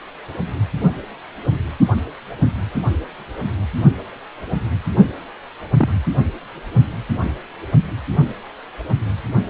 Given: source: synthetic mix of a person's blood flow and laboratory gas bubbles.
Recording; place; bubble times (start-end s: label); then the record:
Doppler ultrasound of blood flow; precordium
5.77-6.01 s: bubbles
From the record:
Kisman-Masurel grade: 112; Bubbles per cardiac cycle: 1 to 2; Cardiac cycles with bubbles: 1 to 10%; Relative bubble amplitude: moderate (0.250 to 0.450); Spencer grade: 1 (occasional bubble signal discernible with the cardiac motion signal, with majority of cardiac periods free of bubbles); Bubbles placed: only in the low amplitude regions of the cardiac cycle